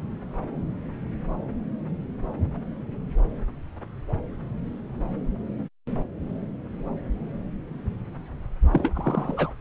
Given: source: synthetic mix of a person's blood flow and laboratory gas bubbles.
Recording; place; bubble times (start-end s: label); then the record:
Doppler ultrasound of blood flow; subclavian vein
8.72-9.51 s: bubbles
From the record:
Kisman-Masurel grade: 212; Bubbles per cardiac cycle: several, 3 to 8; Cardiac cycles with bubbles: 1 to 10%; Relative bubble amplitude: moderate (0.250 to 0.450); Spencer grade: 1 (occasional bubble signal discernible with the cardiac motion signal, with majority of cardiac periods free of bubbles); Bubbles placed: anywhere in the cardiac cycle